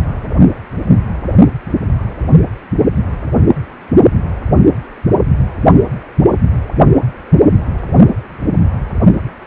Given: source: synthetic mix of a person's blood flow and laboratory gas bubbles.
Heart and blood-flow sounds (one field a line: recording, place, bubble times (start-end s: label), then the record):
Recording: Doppler ultrasound of blood flow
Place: precordium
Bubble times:
no bubbles
From the record:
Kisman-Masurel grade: 000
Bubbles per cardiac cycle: 0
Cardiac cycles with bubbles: 0%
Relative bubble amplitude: no bubbles discernible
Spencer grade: 0 (complete lack of bubble signals)